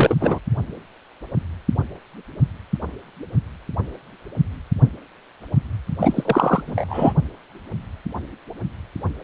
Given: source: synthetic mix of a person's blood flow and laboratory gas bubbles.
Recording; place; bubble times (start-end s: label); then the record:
Doppler ultrasound of blood flow; precordium
0.00-0.16 s: bubbles
0.20-0.39 s: bubbles
6.00-6.63 s: bubbles
6.66-7.13 s: bubbles
From the record:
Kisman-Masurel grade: 333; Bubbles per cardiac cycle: rolling drumbeat, 9 or more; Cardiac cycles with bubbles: 50 to 99%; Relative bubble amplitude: loud (0.450 to 0.775); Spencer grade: 3 (all of the cardiac periods contain showers or single bubble signals, but not dominating or overriding the cardiac motion signals); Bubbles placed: only in the low amplitude regions of the cardiac cycle